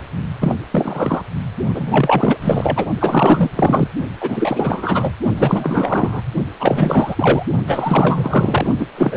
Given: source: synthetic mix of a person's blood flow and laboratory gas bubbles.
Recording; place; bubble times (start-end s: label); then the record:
Doppler ultrasound of blood flow; precordium
0.40-0.55 s: bubbles
0.71-1.23 s: bubbles
1.74-2.37 s: bubbles
2.41-2.86 s: bubbles
2.98-3.50 s: bubbles
3.55-3.88 s: bubbles
4.20-5.12 s: bubbles
5.36-6.21 s: bubbles
6.60-7.46 s: bubbles
7.67-8.67 s: bubbles
8.78-8.86 s: bubbles
8.96-9.17 s: bubbles
From the record:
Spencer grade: 4 (maximum detectable bubble signal sounding continuously throughout systole and diastole of every cardiac period, and overriding the amplitude of the normal cardiac signals); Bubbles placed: only in the low amplitude regions of the cardiac cycle